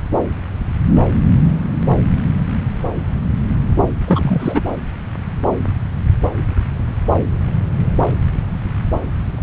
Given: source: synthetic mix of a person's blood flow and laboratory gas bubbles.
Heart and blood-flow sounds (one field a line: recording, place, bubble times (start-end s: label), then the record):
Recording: Doppler ultrasound of blood flow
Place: subclavian vein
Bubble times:
4.07-4.61 s: bubbles
From the record:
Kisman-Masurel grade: 213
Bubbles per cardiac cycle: several, 3 to 8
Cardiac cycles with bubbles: 1 to 10%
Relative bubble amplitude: loud (0.450 to 0.775)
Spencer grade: 1 (occasional bubble signal discernible with the cardiac motion signal, with majority of cardiac periods free of bubbles)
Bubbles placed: anywhere in the cardiac cycle